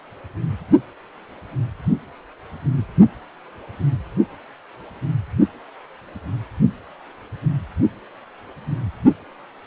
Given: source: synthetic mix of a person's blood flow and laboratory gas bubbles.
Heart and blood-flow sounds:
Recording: Doppler ultrasound of blood flow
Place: precordium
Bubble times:
no bubbles
From the record:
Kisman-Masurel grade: 000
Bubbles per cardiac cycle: 0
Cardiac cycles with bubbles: 0%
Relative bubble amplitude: no bubbles discernible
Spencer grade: 0 (complete lack of bubble signals)

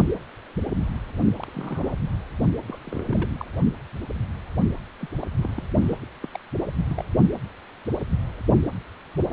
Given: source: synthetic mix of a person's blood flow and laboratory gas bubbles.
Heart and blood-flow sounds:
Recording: Doppler ultrasound of blood flow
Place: precordium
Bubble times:
1.35-1.45 s: bubbles
1.52-1.90 s: bubbles
2.68-2.77 s: bubbles
2.85-3.45 s: bubbles
5.00-5.09 s: bubbles
5.21-5.25 s: bubbles
5.29-5.33 s: bubbles
5.37-5.50 s: bubbles
5.56-5.67 s: bubbles
5.82-5.99 s: bubbles
6.23-6.27 s: bubbles
6.33-6.37 s: bubbles
6.90-7.05 s: bubbles
From the record:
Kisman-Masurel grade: 221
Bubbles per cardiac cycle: several, 3 to 8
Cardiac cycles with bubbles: 10 to 50%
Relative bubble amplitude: barely perceptible (0.100 to 0.250)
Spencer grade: 2 (many but less than half of the cardiac periods contain bubble signals, singularly or in groups)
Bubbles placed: only in the low amplitude regions of the cardiac cycle

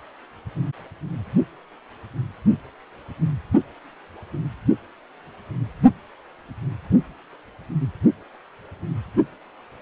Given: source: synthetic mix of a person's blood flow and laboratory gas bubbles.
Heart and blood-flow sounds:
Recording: Doppler ultrasound of blood flow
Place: precordium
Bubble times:
no bubbles
From the record:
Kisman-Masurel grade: 000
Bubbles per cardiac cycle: 0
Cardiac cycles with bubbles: 0%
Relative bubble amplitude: no bubbles discernible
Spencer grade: 0 (complete lack of bubble signals)

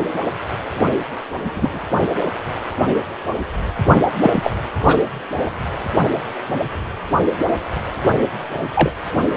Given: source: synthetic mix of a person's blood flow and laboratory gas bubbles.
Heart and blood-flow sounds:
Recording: Doppler ultrasound of blood flow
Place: precordium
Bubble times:
1.34-1.82 s: bubbles
4.21-4.53 s: bubbles
4.79-5.04 s: bubbles
5.46-5.50 s: bubbles
8.75-8.91 s: bubbles
From the record:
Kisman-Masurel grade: 123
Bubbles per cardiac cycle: 1 to 2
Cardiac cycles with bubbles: 10 to 50%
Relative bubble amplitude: loud (0.450 to 0.775)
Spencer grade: 2 (many but less than half of the cardiac periods contain bubble signals, singularly or in groups)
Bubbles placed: anywhere in the cardiac cycle

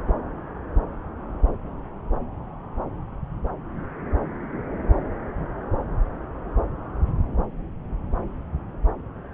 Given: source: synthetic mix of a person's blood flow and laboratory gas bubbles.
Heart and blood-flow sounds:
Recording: Doppler ultrasound of blood flow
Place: subclavian vein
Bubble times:
no bubbles
From the record:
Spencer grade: 0 (complete lack of bubble signals)

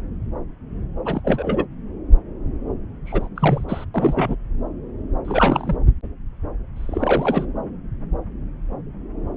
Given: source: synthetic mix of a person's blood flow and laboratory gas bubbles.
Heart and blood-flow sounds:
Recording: Doppler ultrasound of blood flow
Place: subclavian vein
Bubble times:
1.05-1.65 s: bubbles
3.06-3.29 s: bubbles
3.36-3.65 s: bubbles
3.68-3.85 s: bubbles
3.94-4.36 s: bubbles
5.24-5.76 s: bubbles
6.76-7.46 s: bubbles
From the record:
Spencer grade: 2 (many but less than half of the cardiac periods contain bubble signals, singularly or in groups)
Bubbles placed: anywhere in the cardiac cycle

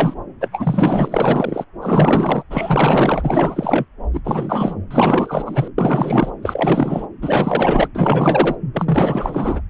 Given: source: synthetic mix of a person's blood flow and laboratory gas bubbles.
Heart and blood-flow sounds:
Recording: Doppler ultrasound of blood flow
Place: subclavian vein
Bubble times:
0.00-0.14 s: bubbles
0.41-0.48 s: bubbles
0.52-1.65 s: bubbles
1.81-2.44 s: bubbles
2.50-3.84 s: bubbles
4.13-4.21 s: bubbles
4.24-4.74 s: bubbles
4.91-5.68 s: bubbles
5.78-6.31 s: bubbles
6.42-7.07 s: bubbles
7.22-7.88 s: bubbles
7.94-8.55 s: bubbles
8.73-9.61 s: bubbles
From the record:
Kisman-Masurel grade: 444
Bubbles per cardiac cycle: continuous sound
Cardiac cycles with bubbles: 100%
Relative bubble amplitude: maximal (0.775 to 0.999)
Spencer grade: 4 (maximum detectable bubble signal sounding continuously throughout systole and diastole of every cardiac period, and overriding the amplitude of the normal cardiac signals)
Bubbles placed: anywhere in the cardiac cycle

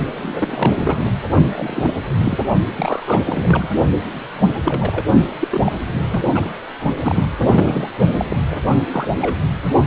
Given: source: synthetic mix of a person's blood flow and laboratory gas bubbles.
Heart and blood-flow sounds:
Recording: Doppler ultrasound of blood flow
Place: precordium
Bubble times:
0.21-1.10 s: bubbles
1.46-1.94 s: bubbles
2.22-2.37 s: bubbles
2.71-3.20 s: bubbles
3.26-3.68 s: bubbles
4.64-5.05 s: bubbles
5.39-5.73 s: bubbles
6.11-6.22 s: bubbles
6.34-6.50 s: bubbles
6.97-7.28 s: bubbles
7.36-7.90 s: bubbles
8.17-8.25 s: bubbles
8.30-8.36 s: bubbles
8.50-8.57 s: bubbles
8.91-9.07 s: bubbles
9.17-9.38 s: bubbles
From the record:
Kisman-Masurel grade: 242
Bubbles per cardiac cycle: several, 3 to 8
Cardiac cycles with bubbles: 100%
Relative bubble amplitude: moderate (0.250 to 0.450)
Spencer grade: 3 (all of the cardiac periods contain showers or single bubble signals, but not dominating or overriding the cardiac motion signals)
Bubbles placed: only in the low amplitude regions of the cardiac cycle

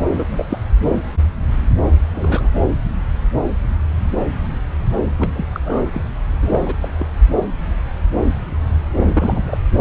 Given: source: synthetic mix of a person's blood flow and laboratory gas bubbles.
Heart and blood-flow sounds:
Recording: Doppler ultrasound of blood flow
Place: subclavian vein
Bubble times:
0.14-0.46 s: bubbles
0.50-0.59 s: bubbles
0.84-1.04 s: bubbles
2.14-2.50 s: bubbles
5.18-5.46 s: bubbles
5.54-5.60 s: bubbles
5.64-5.82 s: bubbles
5.92-6.02 s: bubbles
6.42-6.75 s: bubbles
6.82-6.91 s: bubbles
6.98-7.07 s: bubbles
8.95-9.58 s: bubbles
9.77-9.81 s: bubbles
From the record:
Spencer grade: 2 (many but less than half of the cardiac periods contain bubble signals, singularly or in groups)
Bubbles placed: anywhere in the cardiac cycle

